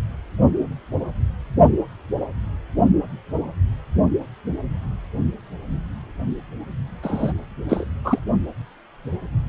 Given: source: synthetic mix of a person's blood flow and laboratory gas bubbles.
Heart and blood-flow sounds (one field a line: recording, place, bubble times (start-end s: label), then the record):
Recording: Doppler ultrasound of blood flow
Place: precordium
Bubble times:
7.02-7.32 s: bubbles
7.69-7.84 s: bubbles
8.04-8.20 s: bubbles
From the record:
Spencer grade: 1 (occasional bubble signal discernible with the cardiac motion signal, with majority of cardiac periods free of bubbles)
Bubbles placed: only in the low amplitude regions of the cardiac cycle